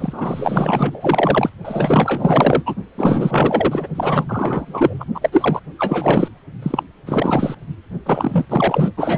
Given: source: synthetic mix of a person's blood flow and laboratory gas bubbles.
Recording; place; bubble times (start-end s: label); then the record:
Doppler ultrasound of blood flow; precordium
0.00-1.50 s: bubbles
1.65-2.63 s: bubbles
2.65-2.75 s: bubbles
2.98-3.88 s: bubbles
3.95-5.04 s: bubbles
5.14-5.60 s: bubbles
5.79-6.29 s: bubbles
6.62-6.83 s: bubbles
7.06-7.55 s: bubbles
8.05-8.45 s: bubbles
8.50-8.93 s: bubbles
8.97-9.18 s: bubbles
From the record:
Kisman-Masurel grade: 444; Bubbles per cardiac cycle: continuous sound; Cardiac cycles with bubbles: 100%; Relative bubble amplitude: maximal (0.775 to 0.999); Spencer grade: 4 (maximum detectable bubble signal sounding continuously throughout systole and diastole of every cardiac period, and overriding the amplitude of the normal cardiac signals); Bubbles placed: only in the low amplitude regions of the cardiac cycle